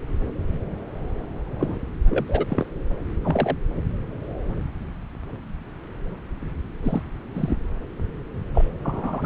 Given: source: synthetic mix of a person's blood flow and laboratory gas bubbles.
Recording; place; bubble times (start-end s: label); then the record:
Doppler ultrasound of blood flow; subclavian vein
1.59-1.79 s: bubbles
2.09-2.23 s: bubbles
2.28-2.46 s: bubbles
2.48-2.66 s: bubbles
3.22-3.55 s: bubbles
6.82-7.02 s: bubbles
7.33-7.56 s: bubbles
8.54-8.70 s: bubbles
8.84-9.26 s: bubbles
From the record:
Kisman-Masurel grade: 122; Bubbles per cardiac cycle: 1 to 2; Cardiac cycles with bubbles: 10 to 50%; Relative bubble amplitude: moderate (0.250 to 0.450); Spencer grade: 2 (many but less than half of the cardiac periods contain bubble signals, singularly or in groups); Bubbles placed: anywhere in the cardiac cycle